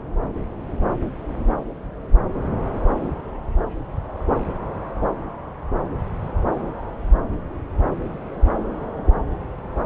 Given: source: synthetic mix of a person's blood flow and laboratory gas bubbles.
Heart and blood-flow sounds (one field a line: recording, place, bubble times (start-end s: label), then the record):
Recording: Doppler ultrasound of blood flow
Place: subclavian vein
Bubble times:
8.63-8.92 s: bubbles
8.96-9.20 s: bubbles
From the record:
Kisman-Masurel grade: 211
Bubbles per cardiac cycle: several, 3 to 8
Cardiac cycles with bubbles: 1 to 10%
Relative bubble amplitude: barely perceptible (0.100 to 0.250)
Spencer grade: 1 (occasional bubble signal discernible with the cardiac motion signal, with majority of cardiac periods free of bubbles)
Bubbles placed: anywhere in the cardiac cycle